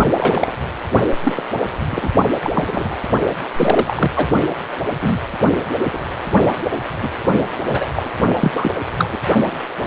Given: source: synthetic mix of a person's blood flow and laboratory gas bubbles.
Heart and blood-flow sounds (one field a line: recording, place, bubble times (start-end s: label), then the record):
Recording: Doppler ultrasound of blood flow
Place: precordium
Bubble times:
0.14-0.54 s: bubbles
1.22-1.43 s: bubbles
1.91-2.10 s: bubbles
2.43-2.51 s: bubbles
2.54-2.97 s: bubbles
3.54-4.12 s: bubbles
4.16-4.28 s: bubbles
5.01-5.21 s: bubbles
5.92-6.00 s: bubbles
7.00-7.09 s: bubbles
7.69-7.88 s: bubbles
7.96-8.10 s: bubbles
8.35-8.71 s: bubbles
8.98-9.09 s: bubbles
9.12-9.18 s: bubbles
9.83-9.87 s: bubbles
From the record:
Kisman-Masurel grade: 243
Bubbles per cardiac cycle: several, 3 to 8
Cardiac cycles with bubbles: 100%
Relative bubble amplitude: loud (0.450 to 0.775)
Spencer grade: 3 (all of the cardiac periods contain showers or single bubble signals, but not dominating or overriding the cardiac motion signals)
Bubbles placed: only in the low amplitude regions of the cardiac cycle